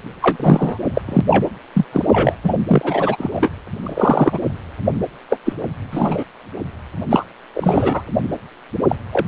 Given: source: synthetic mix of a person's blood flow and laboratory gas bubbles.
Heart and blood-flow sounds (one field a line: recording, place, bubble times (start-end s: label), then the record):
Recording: Doppler ultrasound of blood flow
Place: precordium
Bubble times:
0.21-0.37 s: bubbles
0.40-0.78 s: bubbles
0.94-1.01 s: bubbles
1.06-1.21 s: bubbles
1.29-1.49 s: bubbles
1.73-1.85 s: bubbles
1.92-2.35 s: bubbles
2.44-2.59 s: bubbles
2.67-3.50 s: bubbles
3.83-4.39 s: bubbles
5.29-5.38 s: bubbles
5.45-5.53 s: bubbles
5.91-6.23 s: bubbles
7.10-7.26 s: bubbles
7.54-8.03 s: bubbles
8.88-8.96 s: bubbles
9.12-9.27 s: bubbles
From the record:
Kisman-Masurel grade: 243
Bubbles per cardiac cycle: several, 3 to 8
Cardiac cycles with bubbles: 100%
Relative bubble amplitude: loud (0.450 to 0.775)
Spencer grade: 3 (all of the cardiac periods contain showers or single bubble signals, but not dominating or overriding the cardiac motion signals)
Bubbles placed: anywhere in the cardiac cycle